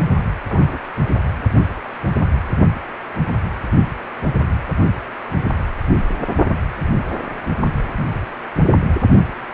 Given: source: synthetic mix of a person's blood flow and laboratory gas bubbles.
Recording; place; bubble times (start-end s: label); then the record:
Doppler ultrasound of blood flow; precordium
0.48-0.79 s: bubbles
7.97-8.04 s: bubbles
From the record:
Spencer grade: 2 (many but less than half of the cardiac periods contain bubble signals, singularly or in groups); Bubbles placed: only in the low amplitude regions of the cardiac cycle